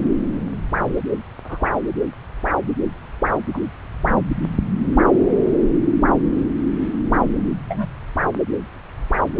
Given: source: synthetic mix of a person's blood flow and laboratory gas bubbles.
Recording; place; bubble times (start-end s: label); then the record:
Doppler ultrasound of blood flow; subclavian vein
1.45-1.70 s: bubbles
3.53-3.60 s: bubbles
7.68-7.86 s: bubbles
From the record:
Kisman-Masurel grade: 122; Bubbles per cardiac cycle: 1 to 2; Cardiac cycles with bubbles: 10 to 50%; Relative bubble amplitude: moderate (0.250 to 0.450); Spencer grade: 2 (many but less than half of the cardiac periods contain bubble signals, singularly or in groups); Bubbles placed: anywhere in the cardiac cycle